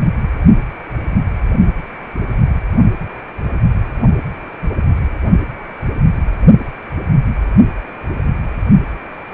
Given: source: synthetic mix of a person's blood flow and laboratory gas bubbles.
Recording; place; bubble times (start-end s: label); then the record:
Doppler ultrasound of blood flow; precordium
no bubbles
From the record:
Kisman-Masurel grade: 000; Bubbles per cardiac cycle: 0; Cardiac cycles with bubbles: 0%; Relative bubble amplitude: no bubbles discernible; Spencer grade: 0 (complete lack of bubble signals)